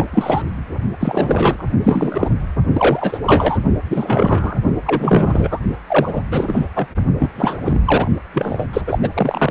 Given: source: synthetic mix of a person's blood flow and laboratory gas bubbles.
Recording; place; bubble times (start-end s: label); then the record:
Doppler ultrasound of blood flow; precordium
0.00-0.05 s: bubbles
0.12-0.42 s: bubbles
1.00-1.64 s: bubbles
1.84-2.30 s: bubbles
2.73-3.19 s: bubbles
3.25-3.58 s: bubbles
3.90-4.56 s: bubbles
4.86-5.59 s: bubbles
5.88-6.22 s: bubbles
6.31-6.70 s: bubbles
6.75-6.87 s: bubbles
7.19-7.29 s: bubbles
7.36-7.58 s: bubbles
7.64-7.81 s: bubbles
7.85-8.08 s: bubbles
8.32-8.65 s: bubbles
8.73-8.81 s: bubbles
8.87-9.09 s: bubbles
9.14-9.51 s: bubbles
From the record:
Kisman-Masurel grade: 343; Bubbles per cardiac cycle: rolling drumbeat, 9 or more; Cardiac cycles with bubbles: 100%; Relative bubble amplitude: loud (0.450 to 0.775); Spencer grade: 3 (all of the cardiac periods contain showers or single bubble signals, but not dominating or overriding the cardiac motion signals); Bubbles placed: only in the low amplitude regions of the cardiac cycle